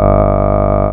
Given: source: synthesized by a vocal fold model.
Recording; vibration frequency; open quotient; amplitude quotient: sustained vowel; 50 Hz; 0.5; 1.3